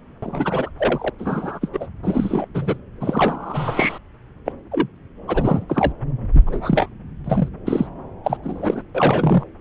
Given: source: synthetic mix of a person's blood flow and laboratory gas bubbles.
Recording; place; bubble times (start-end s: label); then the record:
Doppler ultrasound of blood flow; subclavian vein
0.22-0.70 s: bubbles
0.79-1.09 s: bubbles
1.18-1.68 s: bubbles
1.73-1.87 s: bubbles
2.02-2.46 s: bubbles
2.54-2.78 s: bubbles
3.00-3.99 s: bubbles
4.45-4.52 s: bubbles
4.71-4.88 s: bubbles
5.28-5.65 s: bubbles
5.68-5.92 s: bubbles
6.33-6.89 s: bubbles
7.24-7.49 s: bubbles
7.65-7.87 s: bubbles
8.24-8.37 s: bubbles
8.43-8.82 s: bubbles
8.95-9.44 s: bubbles
From the record:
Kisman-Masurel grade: 243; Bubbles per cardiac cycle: several, 3 to 8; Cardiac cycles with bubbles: 100%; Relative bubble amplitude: loud (0.450 to 0.775); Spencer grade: 3 (all of the cardiac periods contain showers or single bubble signals, but not dominating or overriding the cardiac motion signals); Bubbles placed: anywhere in the cardiac cycle